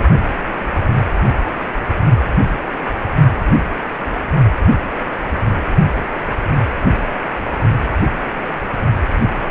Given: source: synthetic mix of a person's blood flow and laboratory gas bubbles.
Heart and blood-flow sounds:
Doppler ultrasound of blood flow; precordium
9.21-9.29 s: bubbles
From the record:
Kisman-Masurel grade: 111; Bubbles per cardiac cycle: 1 to 2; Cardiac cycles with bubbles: 1 to 10%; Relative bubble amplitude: barely perceptible (0.100 to 0.250); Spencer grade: 1 (occasional bubble signal discernible with the cardiac motion signal, with majority of cardiac periods free of bubbles); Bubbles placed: only in the low amplitude regions of the cardiac cycle

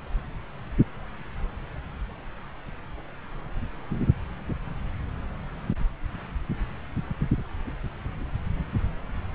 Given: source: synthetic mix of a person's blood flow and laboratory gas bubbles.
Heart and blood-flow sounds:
Doppler ultrasound of blood flow; subclavian vein
no bubbles
From the record:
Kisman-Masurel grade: 000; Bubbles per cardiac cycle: 0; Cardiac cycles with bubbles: 0%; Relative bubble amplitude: no bubbles discernible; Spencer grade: 0 (complete lack of bubble signals)

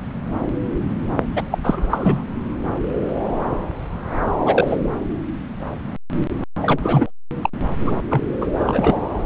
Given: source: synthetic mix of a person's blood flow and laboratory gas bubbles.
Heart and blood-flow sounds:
Doppler ultrasound of blood flow; subclavian vein
1.36-1.43 s: bubbles
1.51-1.58 s: bubbles
1.64-2.23 s: bubbles
4.45-4.76 s: bubbles
6.61-7.10 s: bubbles
7.41-7.49 s: bubbles
7.82-7.92 s: bubbles
8.11-8.21 s: bubbles
8.41-8.46 s: bubbles
8.55-9.01 s: bubbles
From the record:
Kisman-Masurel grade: 222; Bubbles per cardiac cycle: several, 3 to 8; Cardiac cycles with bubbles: 10 to 50%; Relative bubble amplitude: moderate (0.250 to 0.450); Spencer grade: 2 (many but less than half of the cardiac periods contain bubble signals, singularly or in groups); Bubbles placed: anywhere in the cardiac cycle

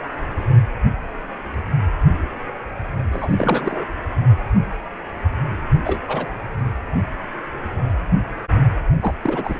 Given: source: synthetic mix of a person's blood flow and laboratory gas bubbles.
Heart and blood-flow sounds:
Doppler ultrasound of blood flow; precordium
3.12-3.84 s: bubbles
5.84-6.01 s: bubbles
6.08-6.26 s: bubbles
9.00-9.12 s: bubbles
9.21-9.59 s: bubbles
From the record:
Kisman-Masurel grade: 222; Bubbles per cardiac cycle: several, 3 to 8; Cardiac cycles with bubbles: 10 to 50%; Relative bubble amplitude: moderate (0.250 to 0.450); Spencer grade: 2 (many but less than half of the cardiac periods contain bubble signals, singularly or in groups); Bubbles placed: anywhere in the cardiac cycle

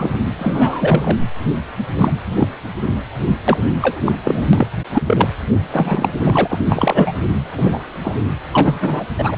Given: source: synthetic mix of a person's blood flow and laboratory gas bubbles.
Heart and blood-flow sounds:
Doppler ultrasound of blood flow; precordium
0.00-0.15 s: bubbles
0.39-1.18 s: bubbles
1.97-2.18 s: bubbles
2.37-2.48 s: bubbles
3.48-3.58 s: bubbles
3.81-4.01 s: bubbles
4.05-4.12 s: bubbles
4.23-4.46 s: bubbles
4.53-4.67 s: bubbles
4.93-5.02 s: bubbles
5.06-5.29 s: bubbles
5.73-6.12 s: bubbles
6.24-6.60 s: bubbles
6.69-7.12 s: bubbles
7.51-7.79 s: bubbles
8.04-8.16 s: bubbles
8.54-9.04 s: bubbles
9.18-9.36 s: bubbles
From the record:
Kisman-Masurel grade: 243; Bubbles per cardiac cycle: several, 3 to 8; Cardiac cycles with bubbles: 100%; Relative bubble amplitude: loud (0.450 to 0.775); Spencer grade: 3 (all of the cardiac periods contain showers or single bubble signals, but not dominating or overriding the cardiac motion signals); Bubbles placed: anywhere in the cardiac cycle

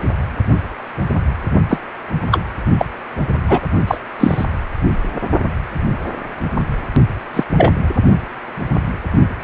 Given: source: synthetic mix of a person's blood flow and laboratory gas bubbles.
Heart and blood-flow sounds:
Doppler ultrasound of blood flow; precordium
1.69-1.79 s: bubbles
2.31-2.42 s: bubbles
2.78-2.86 s: bubbles
3.47-3.60 s: bubbles
3.87-3.98 s: bubbles
4.19-4.44 s: bubbles
7.33-7.44 s: bubbles
7.57-7.74 s: bubbles
From the record:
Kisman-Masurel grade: 123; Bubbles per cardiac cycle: 1 to 2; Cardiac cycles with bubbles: 10 to 50%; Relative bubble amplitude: loud (0.450 to 0.775); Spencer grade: 2 (many but less than half of the cardiac periods contain bubble signals, singularly or in groups); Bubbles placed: only in the low amplitude regions of the cardiac cycle

